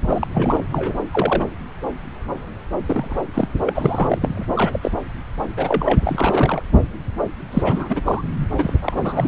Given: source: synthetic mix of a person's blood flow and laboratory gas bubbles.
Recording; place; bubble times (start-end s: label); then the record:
Doppler ultrasound of blood flow; subclavian vein
0.00-0.31 s: bubbles
0.34-0.62 s: bubbles
0.71-1.01 s: bubbles
1.11-1.47 s: bubbles
2.86-3.25 s: bubbles
3.33-3.48 s: bubbles
3.66-4.46 s: bubbles
4.55-4.79 s: bubbles
4.83-4.92 s: bubbles
5.57-6.01 s: bubbles
6.04-6.62 s: bubbles
7.51-8.01 s: bubbles
8.04-8.23 s: bubbles
8.53-8.73 s: bubbles
8.82-9.28 s: bubbles
From the record:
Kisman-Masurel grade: 332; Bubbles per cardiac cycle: rolling drumbeat, 9 or more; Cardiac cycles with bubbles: 50 to 99%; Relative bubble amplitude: moderate (0.250 to 0.450); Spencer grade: 3 (all of the cardiac periods contain showers or single bubble signals, but not dominating or overriding the cardiac motion signals); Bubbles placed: anywhere in the cardiac cycle